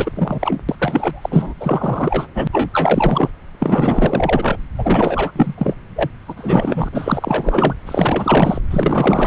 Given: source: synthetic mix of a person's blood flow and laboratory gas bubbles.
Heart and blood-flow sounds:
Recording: Doppler ultrasound of blood flow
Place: subclavian vein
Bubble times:
0.00-0.11 s: bubbles
0.15-0.59 s: bubbles
0.69-0.76 s: bubbles
0.79-1.53 s: bubbles
1.60-2.27 s: bubbles
2.34-2.47 s: bubbles
2.53-2.69 s: bubbles
2.72-3.29 s: bubbles
3.59-4.57 s: bubbles
4.77-5.32 s: bubbles
5.35-5.54 s: bubbles
5.58-5.75 s: bubbles
5.96-6.09 s: bubbles
6.27-6.88 s: bubbles
6.92-7.75 s: bubbles
7.86-8.60 s: bubbles
8.71-9.27 s: bubbles
From the record:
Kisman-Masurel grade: 444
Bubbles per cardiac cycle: continuous sound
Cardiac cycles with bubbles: 100%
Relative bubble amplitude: maximal (0.775 to 0.999)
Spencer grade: 4 (maximum detectable bubble signal sounding continuously throughout systole and diastole of every cardiac period, and overriding the amplitude of the normal cardiac signals)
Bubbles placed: anywhere in the cardiac cycle

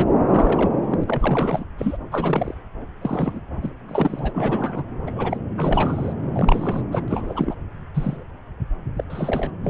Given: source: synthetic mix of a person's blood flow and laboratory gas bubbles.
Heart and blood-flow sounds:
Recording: Doppler ultrasound of blood flow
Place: subclavian vein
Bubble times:
0.00-0.05 s: bubbles
0.29-0.76 s: bubbles
0.83-1.04 s: bubbles
1.06-1.65 s: bubbles
1.78-1.97 s: bubbles
2.11-2.54 s: bubbles
3.02-3.40 s: bubbles
3.61-3.71 s: bubbles
3.89-4.83 s: bubbles
5.06-5.37 s: bubbles
5.57-6.13 s: bubbles
6.34-6.82 s: bubbles
6.91-7.03 s: bubbles
7.08-7.55 s: bubbles
7.94-8.25 s: bubbles
8.97-9.04 s: bubbles
9.10-9.50 s: bubbles
9.63-9.69 s: bubbles
From the record:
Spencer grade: 3 (all of the cardiac periods contain showers or single bubble signals, but not dominating or overriding the cardiac motion signals)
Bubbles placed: anywhere in the cardiac cycle

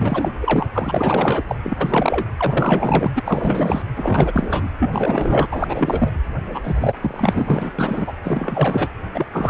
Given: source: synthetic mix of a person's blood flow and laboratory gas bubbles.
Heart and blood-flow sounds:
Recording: Doppler ultrasound of blood flow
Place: precordium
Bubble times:
0.00-0.31 s: bubbles
0.40-0.67 s: bubbles
0.73-1.43 s: bubbles
1.48-1.56 s: bubbles
1.63-1.77 s: bubbles
1.81-2.27 s: bubbles
2.37-3.12 s: bubbles
3.15-3.82 s: bubbles
3.96-4.69 s: bubbles
4.79-5.46 s: bubbles
5.51-6.11 s: bubbles
6.54-6.61 s: bubbles
6.63-6.93 s: bubbles
7.00-7.72 s: bubbles
7.78-8.13 s: bubbles
8.23-8.88 s: bubbles
9.14-9.26 s: bubbles
9.33-9.50 s: bubbles
From the record:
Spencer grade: 4 (maximum detectable bubble signal sounding continuously throughout systole and diastole of every cardiac period, and overriding the amplitude of the normal cardiac signals)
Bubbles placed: anywhere in the cardiac cycle

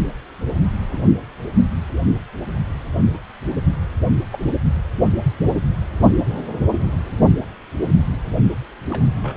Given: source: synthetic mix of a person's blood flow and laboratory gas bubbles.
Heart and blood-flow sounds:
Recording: Doppler ultrasound of blood flow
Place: precordium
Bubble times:
0.92-1.01 s: bubbles
3.13-3.18 s: bubbles
4.32-4.39 s: bubbles
8.90-9.05 s: bubbles
9.21-9.36 s: bubbles
From the record:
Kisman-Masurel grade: 121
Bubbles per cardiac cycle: 1 to 2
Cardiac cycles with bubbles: 10 to 50%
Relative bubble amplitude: barely perceptible (0.100 to 0.250)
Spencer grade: 2 (many but less than half of the cardiac periods contain bubble signals, singularly or in groups)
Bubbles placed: only in the low amplitude regions of the cardiac cycle

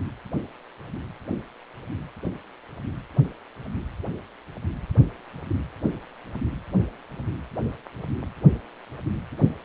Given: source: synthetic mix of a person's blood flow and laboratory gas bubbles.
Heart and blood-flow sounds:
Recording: Doppler ultrasound of blood flow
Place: precordium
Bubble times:
no bubbles
From the record:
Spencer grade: 0 (complete lack of bubble signals)

